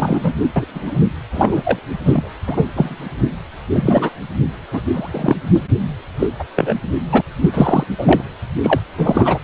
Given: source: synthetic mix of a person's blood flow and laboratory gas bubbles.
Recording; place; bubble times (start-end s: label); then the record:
Doppler ultrasound of blood flow; precordium
0.00-0.33 s: bubbles
0.56-0.65 s: bubbles
0.68-0.98 s: bubbles
1.31-1.79 s: bubbles
2.04-2.29 s: bubbles
2.46-2.65 s: bubbles
2.75-2.96 s: bubbles
3.67-4.11 s: bubbles
4.72-4.81 s: bubbles
4.93-5.37 s: bubbles
5.54-5.59 s: bubbles
6.19-6.27 s: bubbles
6.39-6.44 s: bubbles
6.55-6.74 s: bubbles
7.12-7.22 s: bubbles
7.40-7.50 s: bubbles
7.54-7.86 s: bubbles
7.98-8.23 s: bubbles
8.62-8.79 s: bubbles
8.97-9.38 s: bubbles
From the record:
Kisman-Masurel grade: 243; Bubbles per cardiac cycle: several, 3 to 8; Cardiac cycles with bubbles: 100%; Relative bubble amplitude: loud (0.450 to 0.775); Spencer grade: 3 (all of the cardiac periods contain showers or single bubble signals, but not dominating or overriding the cardiac motion signals); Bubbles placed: anywhere in the cardiac cycle